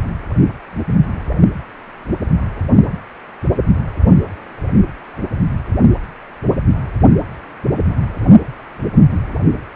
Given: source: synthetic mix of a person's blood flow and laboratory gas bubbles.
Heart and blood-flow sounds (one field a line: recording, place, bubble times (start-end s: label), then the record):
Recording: Doppler ultrasound of blood flow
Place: precordium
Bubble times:
no bubbles
From the record:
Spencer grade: 0 (complete lack of bubble signals)